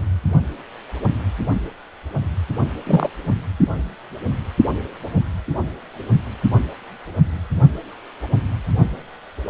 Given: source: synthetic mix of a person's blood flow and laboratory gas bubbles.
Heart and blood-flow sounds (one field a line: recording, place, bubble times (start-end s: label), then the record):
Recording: Doppler ultrasound of blood flow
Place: precordium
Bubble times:
2.87-3.10 s: bubbles
From the record:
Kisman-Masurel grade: 123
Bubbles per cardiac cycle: 1 to 2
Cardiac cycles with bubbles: 10 to 50%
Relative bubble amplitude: loud (0.450 to 0.775)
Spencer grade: 2 (many but less than half of the cardiac periods contain bubble signals, singularly or in groups)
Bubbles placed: anywhere in the cardiac cycle